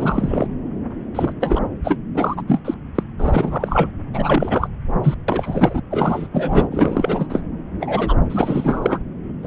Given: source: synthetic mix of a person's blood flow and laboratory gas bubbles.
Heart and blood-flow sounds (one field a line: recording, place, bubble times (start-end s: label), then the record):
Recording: Doppler ultrasound of blood flow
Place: subclavian vein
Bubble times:
0.00-0.47 s: bubbles
1.15-1.32 s: bubbles
1.40-1.60 s: bubbles
1.84-1.97 s: bubbles
2.14-2.42 s: bubbles
2.47-2.60 s: bubbles
2.65-2.75 s: bubbles
2.95-3.03 s: bubbles
3.19-3.91 s: bubbles
4.13-4.68 s: bubbles
5.03-5.15 s: bubbles
5.28-5.82 s: bubbles
5.91-6.28 s: bubbles
6.32-7.26 s: bubbles
7.29-7.42 s: bubbles
7.80-8.17 s: bubbles
8.29-8.99 s: bubbles
9.42-9.47 s: bubbles
From the record:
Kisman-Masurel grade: 343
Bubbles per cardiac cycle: rolling drumbeat, 9 or more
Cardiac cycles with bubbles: 100%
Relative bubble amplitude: loud (0.450 to 0.775)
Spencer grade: 3 (all of the cardiac periods contain showers or single bubble signals, but not dominating or overriding the cardiac motion signals)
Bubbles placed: anywhere in the cardiac cycle